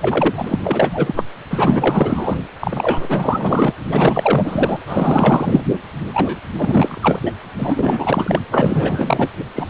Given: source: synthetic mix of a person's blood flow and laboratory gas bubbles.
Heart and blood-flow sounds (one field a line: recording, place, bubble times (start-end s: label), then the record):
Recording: Doppler ultrasound of blood flow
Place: precordium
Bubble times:
0.01-0.59 s: bubbles
0.63-1.13 s: bubbles
1.16-1.23 s: bubbles
1.50-2.36 s: bubbles
2.60-3.73 s: bubbles
3.84-4.80 s: bubbles
4.86-5.64 s: bubbles
6.13-6.38 s: bubbles
6.58-7.20 s: bubbles
7.26-7.32 s: bubbles
7.58-8.39 s: bubbles
8.51-9.28 s: bubbles
9.55-9.70 s: bubbles
From the record:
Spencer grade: 4 (maximum detectable bubble signal sounding continuously throughout systole and diastole of every cardiac period, and overriding the amplitude of the normal cardiac signals)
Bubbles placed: anywhere in the cardiac cycle